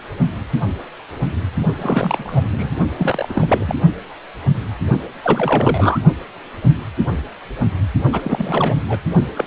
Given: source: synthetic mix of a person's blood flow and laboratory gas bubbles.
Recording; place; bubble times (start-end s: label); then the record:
Doppler ultrasound of blood flow; precordium
1.78-2.44 s: bubbles
2.50-2.71 s: bubbles
2.98-3.75 s: bubbles
5.23-5.99 s: bubbles
8.12-8.21 s: bubbles
8.24-8.84 s: bubbles
8.88-9.00 s: bubbles
9.35-9.45 s: bubbles
From the record:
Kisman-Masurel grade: 332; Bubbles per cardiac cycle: rolling drumbeat, 9 or more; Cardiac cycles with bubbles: 50 to 99%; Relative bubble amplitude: moderate (0.250 to 0.450); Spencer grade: 3 (all of the cardiac periods contain showers or single bubble signals, but not dominating or overriding the cardiac motion signals); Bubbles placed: only in the low amplitude regions of the cardiac cycle